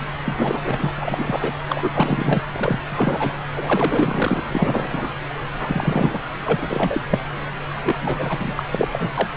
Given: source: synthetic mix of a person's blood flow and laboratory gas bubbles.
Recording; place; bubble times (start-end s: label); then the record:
Doppler ultrasound of blood flow; subclavian vein
0.25-0.91 s: bubbles
0.98-1.57 s: bubbles
1.69-2.44 s: bubbles
2.52-2.80 s: bubbles
2.89-3.33 s: bubbles
3.54-4.44 s: bubbles
4.47-5.14 s: bubbles
5.60-6.19 s: bubbles
6.46-7.01 s: bubbles
7.10-7.20 s: bubbles
7.83-7.96 s: bubbles
8.00-8.63 s: bubbles
8.71-8.88 s: bubbles
8.92-9.10 s: bubbles
9.14-9.28 s: bubbles
From the record:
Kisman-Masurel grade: 343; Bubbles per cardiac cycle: rolling drumbeat, 9 or more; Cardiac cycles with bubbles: 100%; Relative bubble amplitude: loud (0.450 to 0.775); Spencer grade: 3 (all of the cardiac periods contain showers or single bubble signals, but not dominating or overriding the cardiac motion signals); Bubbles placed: anywhere in the cardiac cycle